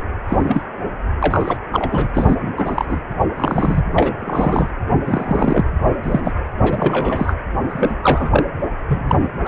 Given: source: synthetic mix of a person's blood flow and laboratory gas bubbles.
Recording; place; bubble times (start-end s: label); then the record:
Doppler ultrasound of blood flow; precordium
0.28-0.66 s: bubbles
1.22-1.57 s: bubbles
1.71-2.08 s: bubbles
2.14-2.36 s: bubbles
2.40-3.00 s: bubbles
3.36-3.83 s: bubbles
3.93-4.13 s: bubbles
4.21-4.71 s: bubbles
5.05-5.63 s: bubbles
6.03-6.34 s: bubbles
6.62-7.34 s: bubbles
7.68-7.95 s: bubbles
8.03-8.46 s: bubbles
8.88-9.31 s: bubbles
9.44-9.48 s: bubbles
From the record:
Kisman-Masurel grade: 243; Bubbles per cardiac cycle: several, 3 to 8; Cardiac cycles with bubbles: 100%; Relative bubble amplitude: loud (0.450 to 0.775); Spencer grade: 3 (all of the cardiac periods contain showers or single bubble signals, but not dominating or overriding the cardiac motion signals); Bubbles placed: anywhere in the cardiac cycle